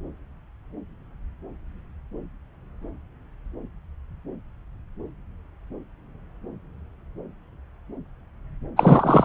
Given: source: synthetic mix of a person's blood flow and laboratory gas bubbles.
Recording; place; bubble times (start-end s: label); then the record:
Doppler ultrasound of blood flow; subclavian vein
8.77-9.25 s: bubbles
From the record:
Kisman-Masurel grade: 213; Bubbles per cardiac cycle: several, 3 to 8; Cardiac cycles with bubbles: 1 to 10%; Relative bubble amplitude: loud (0.450 to 0.775); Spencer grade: 1 (occasional bubble signal discernible with the cardiac motion signal, with majority of cardiac periods free of bubbles); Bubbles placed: anywhere in the cardiac cycle